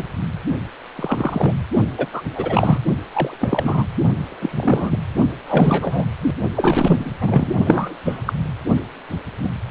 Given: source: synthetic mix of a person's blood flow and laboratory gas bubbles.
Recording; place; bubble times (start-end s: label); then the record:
Doppler ultrasound of blood flow; precordium
0.00-0.04 s: bubbles
0.95-1.52 s: bubbles
1.97-2.06 s: bubbles
2.12-2.22 s: bubbles
2.34-2.79 s: bubbles
3.11-3.85 s: bubbles
4.27-4.99 s: bubbles
5.48-6.05 s: bubbles
6.54-7.55 s: bubbles
7.64-7.96 s: bubbles
8.04-8.33 s: bubbles
9.09-9.20 s: bubbles
9.43-9.50 s: bubbles
From the record:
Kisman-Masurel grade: 243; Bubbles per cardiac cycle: several, 3 to 8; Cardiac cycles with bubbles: 100%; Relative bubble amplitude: loud (0.450 to 0.775); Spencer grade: 3 (all of the cardiac periods contain showers or single bubble signals, but not dominating or overriding the cardiac motion signals); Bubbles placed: only in the low amplitude regions of the cardiac cycle